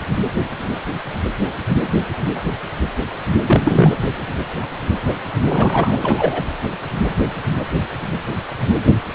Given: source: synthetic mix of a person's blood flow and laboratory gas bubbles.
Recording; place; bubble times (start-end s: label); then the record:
Doppler ultrasound of blood flow; precordium
3.46-3.99 s: bubbles
5.49-5.98 s: bubbles
6.02-6.45 s: bubbles
From the record:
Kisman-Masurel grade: 223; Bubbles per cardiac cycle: several, 3 to 8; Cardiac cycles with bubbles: 10 to 50%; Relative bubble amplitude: loud (0.450 to 0.775); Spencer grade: 2 (many but less than half of the cardiac periods contain bubble signals, singularly or in groups); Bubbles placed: anywhere in the cardiac cycle